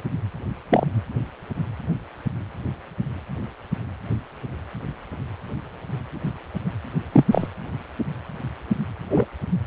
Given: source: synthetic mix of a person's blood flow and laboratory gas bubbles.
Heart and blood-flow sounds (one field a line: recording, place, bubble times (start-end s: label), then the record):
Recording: Doppler ultrasound of blood flow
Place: precordium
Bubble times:
0.69-0.85 s: bubbles
7.12-7.25 s: bubbles
7.32-7.48 s: bubbles
9.10-9.25 s: bubbles
From the record:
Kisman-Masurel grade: 123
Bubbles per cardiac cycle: 1 to 2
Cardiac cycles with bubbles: 10 to 50%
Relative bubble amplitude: loud (0.450 to 0.775)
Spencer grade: 2 (many but less than half of the cardiac periods contain bubble signals, singularly or in groups)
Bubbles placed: anywhere in the cardiac cycle